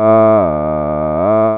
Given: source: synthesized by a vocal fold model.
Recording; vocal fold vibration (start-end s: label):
sustained vowel that changes in the middle
0.00-0.33 s: 109.5 Hz, open quotient 0.32
0.53-1.13 s: 76.1 Hz, open quotient 0.25
1.33-1.57 s: 109.5 Hz, open quotient 0.32